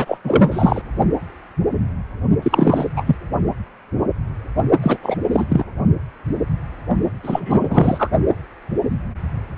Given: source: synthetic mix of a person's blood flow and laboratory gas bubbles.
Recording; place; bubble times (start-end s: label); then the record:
Doppler ultrasound of blood flow; precordium
0.00-0.18 s: bubbles
0.23-0.81 s: bubbles
2.42-2.88 s: bubbles
2.96-3.04 s: bubbles
3.06-3.16 s: bubbles
4.82-4.98 s: bubbles
5.02-5.17 s: bubbles
5.31-5.46 s: bubbles
5.49-5.65 s: bubbles
7.23-8.10 s: bubbles
From the record:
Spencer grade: 3 (all of the cardiac periods contain showers or single bubble signals, but not dominating or overriding the cardiac motion signals); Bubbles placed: only in the low amplitude regions of the cardiac cycle